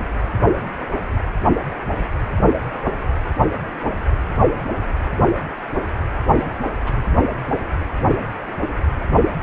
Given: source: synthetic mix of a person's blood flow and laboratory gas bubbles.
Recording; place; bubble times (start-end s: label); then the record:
Doppler ultrasound of blood flow; precordium
6.34-6.60 s: bubbles
6.81-7.02 s: bubbles
From the record:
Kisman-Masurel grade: 211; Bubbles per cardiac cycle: several, 3 to 8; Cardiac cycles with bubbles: 1 to 10%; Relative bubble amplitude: barely perceptible (0.100 to 0.250); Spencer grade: 1 (occasional bubble signal discernible with the cardiac motion signal, with majority of cardiac periods free of bubbles); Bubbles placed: anywhere in the cardiac cycle